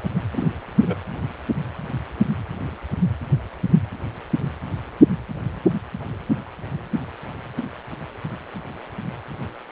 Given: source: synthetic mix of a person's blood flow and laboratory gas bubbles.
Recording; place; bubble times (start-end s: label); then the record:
Doppler ultrasound of blood flow; precordium
0.31-0.48 s: bubbles
0.76-0.98 s: bubbles
From the record:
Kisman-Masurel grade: 211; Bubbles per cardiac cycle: several, 3 to 8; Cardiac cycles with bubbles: 1 to 10%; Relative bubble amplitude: barely perceptible (0.100 to 0.250); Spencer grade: 1 (occasional bubble signal discernible with the cardiac motion signal, with majority of cardiac periods free of bubbles); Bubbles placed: anywhere in the cardiac cycle